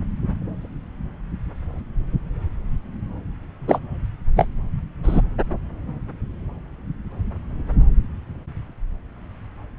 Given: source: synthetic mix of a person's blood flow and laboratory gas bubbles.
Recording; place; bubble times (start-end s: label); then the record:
Doppler ultrasound of blood flow; subclavian vein
3.68-3.79 s: bubbles
4.36-4.48 s: bubbles
5.03-5.21 s: bubbles
From the record:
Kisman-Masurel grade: 123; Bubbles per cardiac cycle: 1 to 2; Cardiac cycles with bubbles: 10 to 50%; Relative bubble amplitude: loud (0.450 to 0.775); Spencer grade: 2 (many but less than half of the cardiac periods contain bubble signals, singularly or in groups); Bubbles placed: anywhere in the cardiac cycle